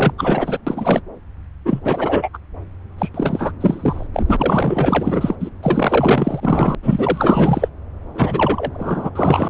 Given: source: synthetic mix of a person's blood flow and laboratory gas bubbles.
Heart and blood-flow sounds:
Doppler ultrasound of blood flow; subclavian vein
0.00-0.13 s: bubbles
0.17-0.58 s: bubbles
0.67-1.01 s: bubbles
1.65-2.29 s: bubbles
2.33-2.38 s: bubbles
2.98-3.09 s: bubbles
3.14-3.52 s: bubbles
3.60-4.07 s: bubbles
4.13-5.36 s: bubbles
5.40-5.50 s: bubbles
5.62-6.75 s: bubbles
6.83-7.69 s: bubbles
8.14-9.10 s: bubbles
9.15-9.48 s: bubbles
From the record:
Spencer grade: 4 (maximum detectable bubble signal sounding continuously throughout systole and diastole of every cardiac period, and overriding the amplitude of the normal cardiac signals); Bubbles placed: anywhere in the cardiac cycle

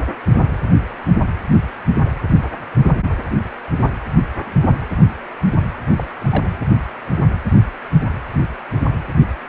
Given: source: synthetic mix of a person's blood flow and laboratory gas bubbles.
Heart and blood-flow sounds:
Doppler ultrasound of blood flow; precordium
5.95-6.05 s: bubbles
6.18-6.52 s: bubbles
From the record:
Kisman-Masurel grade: 111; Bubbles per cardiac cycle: 1 to 2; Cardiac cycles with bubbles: 1 to 10%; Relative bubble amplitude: barely perceptible (0.100 to 0.250); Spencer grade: 1 (occasional bubble signal discernible with the cardiac motion signal, with majority of cardiac periods free of bubbles); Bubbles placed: anywhere in the cardiac cycle

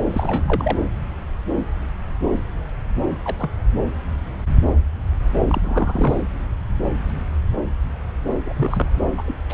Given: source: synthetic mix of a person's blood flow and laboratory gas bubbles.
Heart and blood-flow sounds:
Doppler ultrasound of blood flow; subclavian vein
0.11-0.43 s: bubbles
0.46-0.78 s: bubbles
3.25-3.36 s: bubbles
3.39-3.50 s: bubbles
5.48-6.18 s: bubbles
8.45-8.90 s: bubbles
9.17-9.22 s: bubbles
9.25-9.35 s: bubbles
9.49-9.54 s: bubbles
From the record:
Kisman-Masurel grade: 222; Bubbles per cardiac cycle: several, 3 to 8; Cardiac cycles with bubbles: 10 to 50%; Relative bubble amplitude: moderate (0.250 to 0.450); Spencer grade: 2 (many but less than half of the cardiac periods contain bubble signals, singularly or in groups); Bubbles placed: anywhere in the cardiac cycle

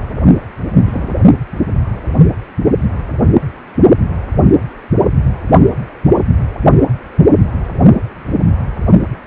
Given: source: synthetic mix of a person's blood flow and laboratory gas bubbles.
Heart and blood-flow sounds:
Doppler ultrasound of blood flow; precordium
0.85-1.15 s: bubbles
From the record:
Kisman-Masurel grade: 112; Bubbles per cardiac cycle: 1 to 2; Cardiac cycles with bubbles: 1 to 10%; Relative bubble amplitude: moderate (0.250 to 0.450); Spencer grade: 1 (occasional bubble signal discernible with the cardiac motion signal, with majority of cardiac periods free of bubbles); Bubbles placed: only in the low amplitude regions of the cardiac cycle

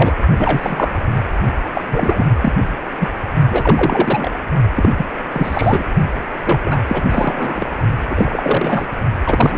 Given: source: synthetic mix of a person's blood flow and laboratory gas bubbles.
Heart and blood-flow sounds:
Doppler ultrasound of blood flow; precordium
0.00-0.13 s: bubbles
0.38-0.95 s: bubbles
1.74-2.26 s: bubbles
2.41-2.53 s: bubbles
3.00-3.08 s: bubbles
3.50-4.31 s: bubbles
4.76-4.89 s: bubbles
4.96-5.07 s: bubbles
5.32-5.84 s: bubbles
6.46-6.62 s: bubbles
6.64-6.79 s: bubbles
6.88-7.03 s: bubbles
7.09-7.65 s: bubbles
8.10-8.86 s: bubbles
9.26-9.58 s: bubbles
From the record:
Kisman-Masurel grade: 343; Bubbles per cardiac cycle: rolling drumbeat, 9 or more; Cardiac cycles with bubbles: 100%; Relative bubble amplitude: loud (0.450 to 0.775); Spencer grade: 3 (all of the cardiac periods contain showers or single bubble signals, but not dominating or overriding the cardiac motion signals); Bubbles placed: only in the low amplitude regions of the cardiac cycle

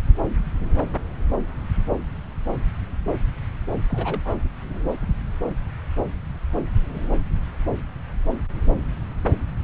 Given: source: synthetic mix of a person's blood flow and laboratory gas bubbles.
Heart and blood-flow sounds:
Doppler ultrasound of blood flow; subclavian vein
3.89-4.34 s: bubbles
From the record:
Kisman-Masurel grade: 211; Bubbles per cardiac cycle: several, 3 to 8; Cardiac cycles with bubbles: 1 to 10%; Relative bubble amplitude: barely perceptible (0.100 to 0.250); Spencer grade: 1 (occasional bubble signal discernible with the cardiac motion signal, with majority of cardiac periods free of bubbles); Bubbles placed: anywhere in the cardiac cycle

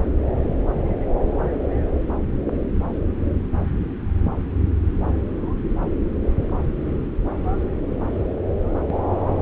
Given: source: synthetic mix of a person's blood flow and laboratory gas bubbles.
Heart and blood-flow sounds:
Doppler ultrasound of blood flow; subclavian vein
no bubbles
From the record:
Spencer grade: 0 (complete lack of bubble signals)

